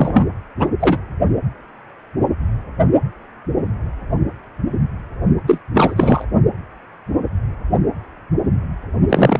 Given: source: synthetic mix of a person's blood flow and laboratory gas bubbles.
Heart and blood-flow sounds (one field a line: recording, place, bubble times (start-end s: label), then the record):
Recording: Doppler ultrasound of blood flow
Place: precordium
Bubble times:
0.00-0.26 s: bubbles
0.58-0.69 s: bubbles
0.80-0.97 s: bubbles
5.47-5.59 s: bubbles
5.74-6.25 s: bubbles
9.09-9.39 s: bubbles
From the record:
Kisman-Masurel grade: 223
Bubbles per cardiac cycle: several, 3 to 8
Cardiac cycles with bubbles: 10 to 50%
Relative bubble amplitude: loud (0.450 to 0.775)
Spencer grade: 2 (many but less than half of the cardiac periods contain bubble signals, singularly or in groups)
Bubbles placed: only in the low amplitude regions of the cardiac cycle